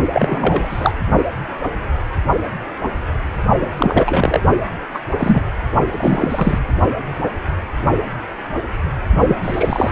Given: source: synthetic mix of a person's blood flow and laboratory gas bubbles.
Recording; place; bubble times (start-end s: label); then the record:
Doppler ultrasound of blood flow; precordium
0.13-0.92 s: bubbles
3.60-3.71 s: bubbles
3.79-4.41 s: bubbles
4.94-4.99 s: bubbles
5.18-5.44 s: bubbles
5.91-6.59 s: bubbles
9.26-9.92 s: bubbles
From the record:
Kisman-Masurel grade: 233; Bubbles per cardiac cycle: several, 3 to 8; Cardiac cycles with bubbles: 50 to 99%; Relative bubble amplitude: loud (0.450 to 0.775); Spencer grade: 3 (all of the cardiac periods contain showers or single bubble signals, but not dominating or overriding the cardiac motion signals); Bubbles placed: only in the low amplitude regions of the cardiac cycle